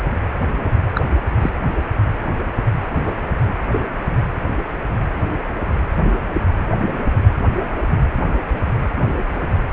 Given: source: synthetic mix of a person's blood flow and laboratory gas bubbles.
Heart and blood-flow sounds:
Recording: Doppler ultrasound of blood flow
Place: precordium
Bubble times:
0.95-1.00 s: bubbles
1.40-1.50 s: bubbles
2.94-3.15 s: bubbles
3.72-3.81 s: bubbles
From the record:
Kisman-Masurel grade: 122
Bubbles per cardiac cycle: 1 to 2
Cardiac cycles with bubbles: 10 to 50%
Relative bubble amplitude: moderate (0.250 to 0.450)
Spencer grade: 2 (many but less than half of the cardiac periods contain bubble signals, singularly or in groups)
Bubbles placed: anywhere in the cardiac cycle

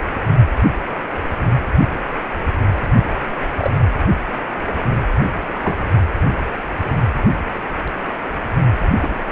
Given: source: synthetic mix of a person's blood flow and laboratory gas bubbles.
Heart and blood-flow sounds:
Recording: Doppler ultrasound of blood flow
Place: precordium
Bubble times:
3.58-3.71 s: bubbles
5.52-5.86 s: bubbles
9.02-9.13 s: bubbles
From the record:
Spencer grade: 2 (many but less than half of the cardiac periods contain bubble signals, singularly or in groups)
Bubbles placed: anywhere in the cardiac cycle

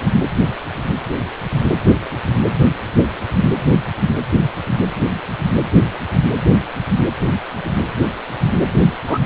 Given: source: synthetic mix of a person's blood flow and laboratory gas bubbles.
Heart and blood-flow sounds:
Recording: Doppler ultrasound of blood flow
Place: precordium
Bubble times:
9.07-9.19 s: bubbles
From the record:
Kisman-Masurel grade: 113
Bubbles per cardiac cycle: 1 to 2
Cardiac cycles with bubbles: 1 to 10%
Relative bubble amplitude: loud (0.450 to 0.775)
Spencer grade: 1 (occasional bubble signal discernible with the cardiac motion signal, with majority of cardiac periods free of bubbles)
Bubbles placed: anywhere in the cardiac cycle

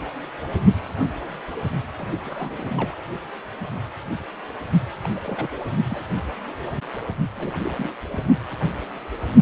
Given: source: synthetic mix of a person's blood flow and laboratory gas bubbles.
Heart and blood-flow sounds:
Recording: Doppler ultrasound of blood flow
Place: precordium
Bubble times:
1.98-2.08 s: bubbles
2.24-2.95 s: bubbles
5.03-5.08 s: bubbles
5.16-5.20 s: bubbles
5.24-5.49 s: bubbles
5.88-6.07 s: bubbles
7.36-7.90 s: bubbles
8.12-8.24 s: bubbles
From the record:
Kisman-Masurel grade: 221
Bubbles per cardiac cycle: several, 3 to 8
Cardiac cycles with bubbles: 10 to 50%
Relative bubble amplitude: barely perceptible (0.100 to 0.250)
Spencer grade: 2 (many but less than half of the cardiac periods contain bubble signals, singularly or in groups)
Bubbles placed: only in the low amplitude regions of the cardiac cycle

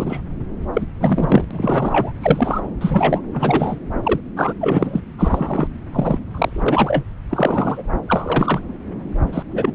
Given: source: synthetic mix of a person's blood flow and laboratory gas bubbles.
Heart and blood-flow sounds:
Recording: Doppler ultrasound of blood flow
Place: subclavian vein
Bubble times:
0.00-0.21 s: bubbles
0.73-0.85 s: bubbles
1.00-1.45 s: bubbles
1.50-2.12 s: bubbles
2.21-2.60 s: bubbles
2.81-3.21 s: bubbles
3.33-3.77 s: bubbles
4.03-4.21 s: bubbles
4.36-4.54 s: bubbles
4.60-5.01 s: bubbles
5.18-5.68 s: bubbles
5.92-6.19 s: bubbles
6.31-6.63 s: bubbles
6.66-7.04 s: bubbles
7.29-7.83 s: bubbles
8.08-8.60 s: bubbles
9.33-9.43 s: bubbles
9.52-9.72 s: bubbles
From the record:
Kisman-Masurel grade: 243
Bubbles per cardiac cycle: several, 3 to 8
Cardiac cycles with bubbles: 100%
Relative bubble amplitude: loud (0.450 to 0.775)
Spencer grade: 3 (all of the cardiac periods contain showers or single bubble signals, but not dominating or overriding the cardiac motion signals)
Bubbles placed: anywhere in the cardiac cycle

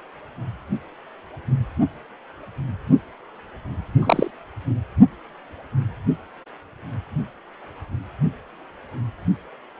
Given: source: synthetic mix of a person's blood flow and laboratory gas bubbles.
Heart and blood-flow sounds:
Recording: Doppler ultrasound of blood flow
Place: precordium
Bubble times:
3.99-4.31 s: bubbles
From the record:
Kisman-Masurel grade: 113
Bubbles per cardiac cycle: 1 to 2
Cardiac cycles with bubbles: 1 to 10%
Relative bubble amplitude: loud (0.450 to 0.775)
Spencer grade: 1 (occasional bubble signal discernible with the cardiac motion signal, with majority of cardiac periods free of bubbles)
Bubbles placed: only in the low amplitude regions of the cardiac cycle

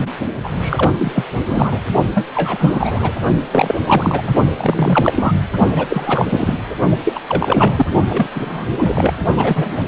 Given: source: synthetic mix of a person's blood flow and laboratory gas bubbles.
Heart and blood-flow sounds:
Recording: Doppler ultrasound of blood flow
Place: precordium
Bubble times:
0.00-0.09 s: bubbles
0.43-0.48 s: bubbles
0.60-0.91 s: bubbles
0.98-1.25 s: bubbles
1.46-1.80 s: bubbles
2.14-2.27 s: bubbles
2.34-3.12 s: bubbles
3.52-3.75 s: bubbles
3.86-4.34 s: bubbles
4.57-5.32 s: bubbles
5.76-6.25 s: bubbles
6.28-6.56 s: bubbles
7.05-7.20 s: bubbles
7.28-7.86 s: bubbles
8.09-8.27 s: bubbles
8.35-8.66 s: bubbles
8.78-9.13 s: bubbles
9.37-9.82 s: bubbles
From the record:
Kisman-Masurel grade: 343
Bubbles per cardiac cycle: rolling drumbeat, 9 or more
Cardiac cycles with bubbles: 100%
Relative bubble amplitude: loud (0.450 to 0.775)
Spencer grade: 3 (all of the cardiac periods contain showers or single bubble signals, but not dominating or overriding the cardiac motion signals)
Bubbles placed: only in the low amplitude regions of the cardiac cycle

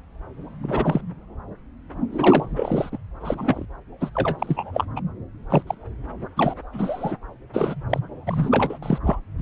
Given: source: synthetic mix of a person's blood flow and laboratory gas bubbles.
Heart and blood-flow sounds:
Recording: Doppler ultrasound of blood flow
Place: subclavian vein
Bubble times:
0.62-1.01 s: bubbles
2.12-2.46 s: bubbles
2.56-2.98 s: bubbles
3.20-3.65 s: bubbles
4.00-4.09 s: bubbles
4.14-4.85 s: bubbles
4.96-5.00 s: bubbles
5.50-5.62 s: bubbles
5.67-5.75 s: bubbles
6.36-6.54 s: bubbles
6.72-7.17 s: bubbles
7.53-7.75 s: bubbles
7.89-7.99 s: bubbles
8.26-8.79 s: bubbles
8.82-8.98 s: bubbles
9.04-9.20 s: bubbles
9.38-9.42 s: bubbles
From the record:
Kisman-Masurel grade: 233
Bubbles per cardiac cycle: several, 3 to 8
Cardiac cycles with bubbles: 50 to 99%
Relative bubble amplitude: loud (0.450 to 0.775)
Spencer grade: 3 (all of the cardiac periods contain showers or single bubble signals, but not dominating or overriding the cardiac motion signals)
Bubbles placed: anywhere in the cardiac cycle

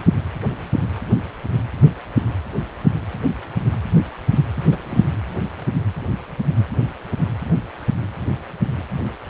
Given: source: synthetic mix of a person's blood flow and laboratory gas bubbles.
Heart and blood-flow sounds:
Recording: Doppler ultrasound of blood flow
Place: precordium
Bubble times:
4.56-4.63 s: bubbles
4.71-4.77 s: bubbles
4.85-5.07 s: bubbles
From the record:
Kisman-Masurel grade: 212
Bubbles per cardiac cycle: several, 3 to 8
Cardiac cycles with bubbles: 1 to 10%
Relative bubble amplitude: moderate (0.250 to 0.450)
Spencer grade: 1 (occasional bubble signal discernible with the cardiac motion signal, with majority of cardiac periods free of bubbles)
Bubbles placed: anywhere in the cardiac cycle

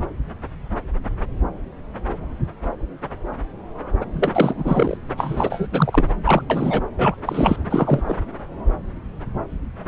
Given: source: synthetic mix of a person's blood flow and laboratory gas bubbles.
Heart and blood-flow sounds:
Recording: Doppler ultrasound of blood flow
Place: subclavian vein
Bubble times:
4.01-4.06 s: bubbles
4.14-4.97 s: bubbles
5.17-5.68 s: bubbles
5.72-6.11 s: bubbles
6.24-6.43 s: bubbles
6.50-6.82 s: bubbles
6.98-7.16 s: bubbles
7.25-7.57 s: bubbles
7.70-8.15 s: bubbles
9.86-9.88 s: bubbles
From the record:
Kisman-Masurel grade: 333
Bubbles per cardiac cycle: rolling drumbeat, 9 or more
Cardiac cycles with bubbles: 50 to 99%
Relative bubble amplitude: loud (0.450 to 0.775)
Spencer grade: 3 (all of the cardiac periods contain showers or single bubble signals, but not dominating or overriding the cardiac motion signals)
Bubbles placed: anywhere in the cardiac cycle

